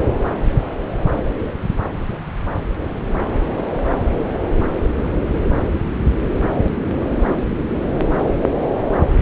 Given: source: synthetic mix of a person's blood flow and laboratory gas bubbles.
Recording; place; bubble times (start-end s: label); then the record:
Doppler ultrasound of blood flow; subclavian vein
no bubbles
From the record:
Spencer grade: 0 (complete lack of bubble signals)